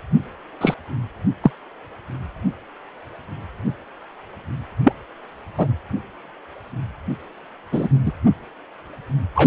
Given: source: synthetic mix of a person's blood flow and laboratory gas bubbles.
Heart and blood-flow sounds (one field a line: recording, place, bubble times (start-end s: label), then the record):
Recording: Doppler ultrasound of blood flow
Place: precordium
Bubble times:
0.61-0.74 s: bubbles
1.43-1.51 s: bubbles
4.84-4.92 s: bubbles
5.58-5.67 s: bubbles
7.72-7.89 s: bubbles
8.05-8.11 s: bubbles
9.35-9.47 s: bubbles
From the record:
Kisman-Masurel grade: 123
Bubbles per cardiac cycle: 1 to 2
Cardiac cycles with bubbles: 10 to 50%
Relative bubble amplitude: loud (0.450 to 0.775)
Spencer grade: 2 (many but less than half of the cardiac periods contain bubble signals, singularly or in groups)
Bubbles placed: anywhere in the cardiac cycle